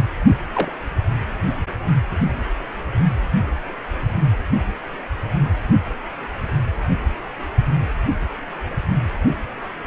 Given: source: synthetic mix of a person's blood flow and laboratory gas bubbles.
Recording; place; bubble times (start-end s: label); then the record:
Doppler ultrasound of blood flow; precordium
0.54-0.72 s: bubbles
From the record:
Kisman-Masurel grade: 112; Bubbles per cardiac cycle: 1 to 2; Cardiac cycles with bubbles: 1 to 10%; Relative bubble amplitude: moderate (0.250 to 0.450); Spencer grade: 1 (occasional bubble signal discernible with the cardiac motion signal, with majority of cardiac periods free of bubbles); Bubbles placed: only in the low amplitude regions of the cardiac cycle